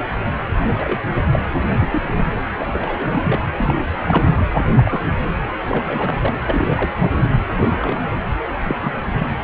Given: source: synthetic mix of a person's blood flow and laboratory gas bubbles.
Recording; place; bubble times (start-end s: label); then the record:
Doppler ultrasound of blood flow; precordium
0.00-0.06 s: bubbles
0.60-0.98 s: bubbles
1.33-1.44 s: bubbles
1.80-2.33 s: bubbles
2.57-3.40 s: bubbles
3.57-3.84 s: bubbles
4.00-4.44 s: bubbles
4.56-4.69 s: bubbles
4.75-5.00 s: bubbles
5.69-6.17 s: bubbles
6.20-6.38 s: bubbles
6.46-6.90 s: bubbles
7.01-7.29 s: bubbles
7.56-8.01 s: bubbles
8.65-8.75 s: bubbles
8.82-8.92 s: bubbles
9.11-9.27 s: bubbles
From the record:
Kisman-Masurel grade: 242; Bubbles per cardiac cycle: several, 3 to 8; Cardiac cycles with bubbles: 100%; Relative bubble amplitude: moderate (0.250 to 0.450); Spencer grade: 3 (all of the cardiac periods contain showers or single bubble signals, but not dominating or overriding the cardiac motion signals); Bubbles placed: anywhere in the cardiac cycle